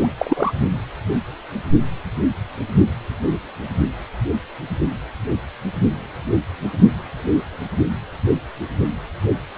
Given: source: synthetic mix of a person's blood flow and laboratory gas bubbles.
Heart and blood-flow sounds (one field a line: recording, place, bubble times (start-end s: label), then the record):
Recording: Doppler ultrasound of blood flow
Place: precordium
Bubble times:
0.00-0.07 s: bubbles
0.17-0.53 s: bubbles
From the record:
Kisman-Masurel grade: 223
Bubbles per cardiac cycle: several, 3 to 8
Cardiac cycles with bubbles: 10 to 50%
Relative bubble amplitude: loud (0.450 to 0.775)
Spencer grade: 2 (many but less than half of the cardiac periods contain bubble signals, singularly or in groups)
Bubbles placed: only in the low amplitude regions of the cardiac cycle